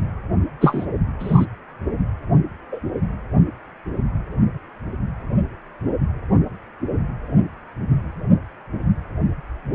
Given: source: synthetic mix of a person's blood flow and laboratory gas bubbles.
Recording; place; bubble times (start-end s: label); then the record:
Doppler ultrasound of blood flow; precordium
0.60-0.85 s: bubbles
1.20-1.46 s: bubbles
2.71-2.80 s: bubbles
From the record:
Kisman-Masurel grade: 123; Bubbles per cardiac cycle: 1 to 2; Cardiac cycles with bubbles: 10 to 50%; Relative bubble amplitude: loud (0.450 to 0.775); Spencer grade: 2 (many but less than half of the cardiac periods contain bubble signals, singularly or in groups); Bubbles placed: anywhere in the cardiac cycle